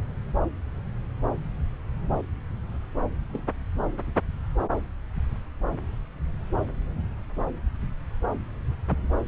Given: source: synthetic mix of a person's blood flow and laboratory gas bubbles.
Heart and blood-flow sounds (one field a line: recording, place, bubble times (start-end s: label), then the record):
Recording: Doppler ultrasound of blood flow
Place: subclavian vein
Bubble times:
3.28-3.43 s: bubbles
From the record:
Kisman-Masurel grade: 121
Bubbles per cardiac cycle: 1 to 2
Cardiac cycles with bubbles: 10 to 50%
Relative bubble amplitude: barely perceptible (0.100 to 0.250)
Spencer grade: 2 (many but less than half of the cardiac periods contain bubble signals, singularly or in groups)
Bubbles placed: anywhere in the cardiac cycle